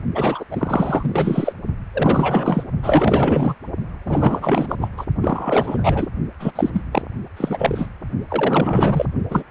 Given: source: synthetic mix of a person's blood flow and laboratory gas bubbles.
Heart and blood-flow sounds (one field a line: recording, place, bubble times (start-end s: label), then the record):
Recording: Doppler ultrasound of blood flow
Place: precordium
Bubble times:
0.14-0.44 s: bubbles
0.51-1.54 s: bubbles
1.94-2.63 s: bubbles
2.82-3.55 s: bubbles
4.05-4.88 s: bubbles
4.97-5.06 s: bubbles
5.21-6.08 s: bubbles
6.40-6.52 s: bubbles
6.55-6.70 s: bubbles
6.73-6.81 s: bubbles
6.92-7.03 s: bubbles
7.37-7.89 s: bubbles
8.29-9.05 s: bubbles
9.30-9.44 s: bubbles
From the record:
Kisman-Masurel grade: 444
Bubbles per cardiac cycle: continuous sound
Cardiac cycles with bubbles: 100%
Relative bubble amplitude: maximal (0.775 to 0.999)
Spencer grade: 4 (maximum detectable bubble signal sounding continuously throughout systole and diastole of every cardiac period, and overriding the amplitude of the normal cardiac signals)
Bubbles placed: only in the low amplitude regions of the cardiac cycle